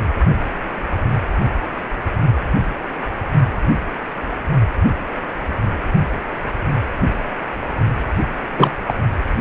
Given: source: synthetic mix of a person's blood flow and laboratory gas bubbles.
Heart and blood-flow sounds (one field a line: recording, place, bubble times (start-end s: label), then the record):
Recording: Doppler ultrasound of blood flow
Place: precordium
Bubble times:
8.57-8.71 s: bubbles
8.86-8.94 s: bubbles
From the record:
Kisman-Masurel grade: 213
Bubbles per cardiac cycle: several, 3 to 8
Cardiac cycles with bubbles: 1 to 10%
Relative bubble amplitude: loud (0.450 to 0.775)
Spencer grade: 1 (occasional bubble signal discernible with the cardiac motion signal, with majority of cardiac periods free of bubbles)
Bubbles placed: anywhere in the cardiac cycle